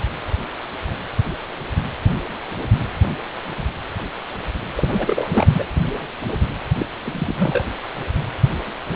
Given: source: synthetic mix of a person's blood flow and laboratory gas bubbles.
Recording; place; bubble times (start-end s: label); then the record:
Doppler ultrasound of blood flow; precordium
4.77-5.30 s: bubbles
5.34-5.46 s: bubbles
5.53-5.63 s: bubbles
6.79-6.86 s: bubbles
7.03-7.64 s: bubbles
From the record:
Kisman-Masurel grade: 222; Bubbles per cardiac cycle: several, 3 to 8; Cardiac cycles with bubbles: 10 to 50%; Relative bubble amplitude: moderate (0.250 to 0.450); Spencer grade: 2 (many but less than half of the cardiac periods contain bubble signals, singularly or in groups); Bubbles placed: anywhere in the cardiac cycle